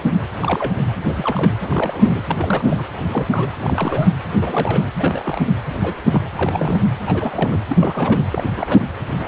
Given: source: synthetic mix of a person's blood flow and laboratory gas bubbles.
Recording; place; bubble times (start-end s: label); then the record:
Doppler ultrasound of blood flow; precordium
0.40-0.79 s: bubbles
1.07-1.57 s: bubbles
1.61-2.22 s: bubbles
2.27-2.84 s: bubbles
3.09-3.48 s: bubbles
3.60-4.10 s: bubbles
4.41-4.84 s: bubbles
4.96-5.41 s: bubbles
5.81-5.94 s: bubbles
6.04-6.21 s: bubbles
6.34-6.81 s: bubbles
7.06-7.58 s: bubbles
7.68-8.26 s: bubbles
8.32-8.50 s: bubbles
8.55-8.87 s: bubbles
9.15-9.28 s: bubbles
From the record:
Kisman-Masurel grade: 242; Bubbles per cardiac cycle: several, 3 to 8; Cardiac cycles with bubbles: 100%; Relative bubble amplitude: moderate (0.250 to 0.450); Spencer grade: 3 (all of the cardiac periods contain showers or single bubble signals, but not dominating or overriding the cardiac motion signals); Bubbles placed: anywhere in the cardiac cycle